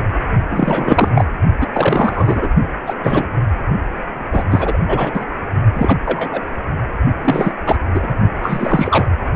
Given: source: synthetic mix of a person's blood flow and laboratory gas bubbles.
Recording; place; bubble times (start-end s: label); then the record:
Doppler ultrasound of blood flow; precordium
0.51-1.08 s: bubbles
1.15-1.24 s: bubbles
1.61-1.68 s: bubbles
1.74-2.48 s: bubbles
2.86-2.94 s: bubbles
3.04-3.30 s: bubbles
4.31-4.46 s: bubbles
4.51-4.77 s: bubbles
4.88-5.25 s: bubbles
5.74-5.96 s: bubbles
6.05-6.40 s: bubbles
7.22-7.52 s: bubbles
7.66-7.75 s: bubbles
7.95-8.13 s: bubbles
8.42-9.05 s: bubbles
From the record:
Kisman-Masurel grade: 243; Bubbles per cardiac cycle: several, 3 to 8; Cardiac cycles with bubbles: 100%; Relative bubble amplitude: loud (0.450 to 0.775); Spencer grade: 3 (all of the cardiac periods contain showers or single bubble signals, but not dominating or overriding the cardiac motion signals); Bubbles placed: only in the low amplitude regions of the cardiac cycle